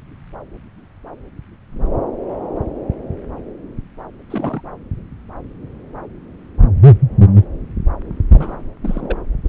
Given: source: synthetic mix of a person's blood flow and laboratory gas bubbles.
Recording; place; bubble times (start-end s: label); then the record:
Doppler ultrasound of blood flow; subclavian vein
4.30-4.61 s: bubbles
8.33-8.56 s: bubbles
8.83-9.18 s: bubbles
9.45-9.49 s: bubbles
From the record:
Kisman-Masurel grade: 221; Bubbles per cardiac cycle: several, 3 to 8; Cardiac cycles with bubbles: 10 to 50%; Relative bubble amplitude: barely perceptible (0.100 to 0.250); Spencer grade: 2 (many but less than half of the cardiac periods contain bubble signals, singularly or in groups); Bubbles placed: anywhere in the cardiac cycle